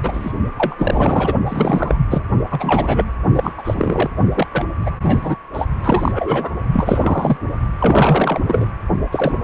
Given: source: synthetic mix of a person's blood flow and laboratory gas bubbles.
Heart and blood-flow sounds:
Doppler ultrasound of blood flow; precordium
0.03-0.32 s: bubbles
0.57-0.75 s: bubbles
0.78-1.33 s: bubbles
1.46-2.00 s: bubbles
2.10-2.23 s: bubbles
2.50-3.10 s: bubbles
3.34-3.52 s: bubbles
3.58-4.08 s: bubbles
4.34-4.47 s: bubbles
4.53-4.65 s: bubbles
4.81-4.96 s: bubbles
5.03-5.37 s: bubbles
5.53-5.66 s: bubbles
5.83-6.51 s: bubbles
6.72-7.37 s: bubbles
7.79-8.39 s: bubbles
8.47-8.69 s: bubbles
9.12-9.35 s: bubbles
From the record:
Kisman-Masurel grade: 343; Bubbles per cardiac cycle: rolling drumbeat, 9 or more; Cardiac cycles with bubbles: 100%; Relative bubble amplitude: loud (0.450 to 0.775); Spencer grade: 3 (all of the cardiac periods contain showers or single bubble signals, but not dominating or overriding the cardiac motion signals); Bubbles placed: only in the low amplitude regions of the cardiac cycle

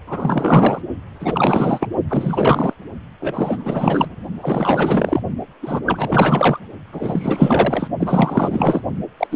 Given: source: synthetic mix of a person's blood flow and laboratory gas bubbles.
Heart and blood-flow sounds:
Doppler ultrasound of blood flow; precordium
0.07-0.82 s: bubbles
1.20-1.88 s: bubbles
2.08-2.74 s: bubbles
3.20-4.15 s: bubbles
4.39-5.22 s: bubbles
5.62-5.80 s: bubbles
5.86-6.59 s: bubbles
6.92-7.90 s: bubbles
8.00-8.81 s: bubbles
9.18-9.27 s: bubbles
9.31-9.36 s: bubbles
From the record:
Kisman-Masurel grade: 444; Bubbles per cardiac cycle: continuous sound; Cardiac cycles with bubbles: 100%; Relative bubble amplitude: maximal (0.775 to 0.999); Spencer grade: 4 (maximum detectable bubble signal sounding continuously throughout systole and diastole of every cardiac period, and overriding the amplitude of the normal cardiac signals); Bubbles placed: only in the low amplitude regions of the cardiac cycle

